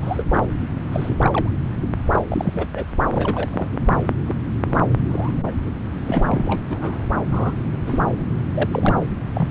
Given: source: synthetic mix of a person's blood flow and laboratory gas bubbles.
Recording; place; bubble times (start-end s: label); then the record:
Doppler ultrasound of blood flow; subclavian vein
0.02-0.26 s: bubbles
0.30-0.47 s: bubbles
0.92-1.17 s: bubbles
1.21-1.49 s: bubbles
2.12-2.19 s: bubbles
2.28-2.66 s: bubbles
2.74-2.85 s: bubbles
3.10-3.98 s: bubbles
4.26-4.35 s: bubbles
4.66-4.85 s: bubbles
5.10-5.51 s: bubbles
6.06-6.62 s: bubbles
6.68-7.05 s: bubbles
7.31-7.54 s: bubbles
7.87-8.00 s: bubbles
8.54-8.69 s: bubbles
8.72-8.96 s: bubbles
9.34-9.51 s: bubbles
From the record:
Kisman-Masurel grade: 242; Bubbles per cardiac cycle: several, 3 to 8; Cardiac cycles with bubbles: 100%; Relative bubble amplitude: moderate (0.250 to 0.450); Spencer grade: 3 (all of the cardiac periods contain showers or single bubble signals, but not dominating or overriding the cardiac motion signals); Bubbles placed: anywhere in the cardiac cycle